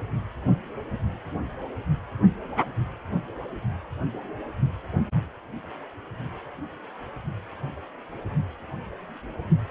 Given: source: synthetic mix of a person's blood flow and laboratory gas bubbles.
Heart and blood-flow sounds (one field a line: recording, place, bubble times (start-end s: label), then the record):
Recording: Doppler ultrasound of blood flow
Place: precordium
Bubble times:
9.69-9.71 s: bubbles
From the record:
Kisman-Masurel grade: 212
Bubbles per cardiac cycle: several, 3 to 8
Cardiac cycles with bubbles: 1 to 10%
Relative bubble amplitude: moderate (0.250 to 0.450)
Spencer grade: 1 (occasional bubble signal discernible with the cardiac motion signal, with majority of cardiac periods free of bubbles)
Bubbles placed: only in the low amplitude regions of the cardiac cycle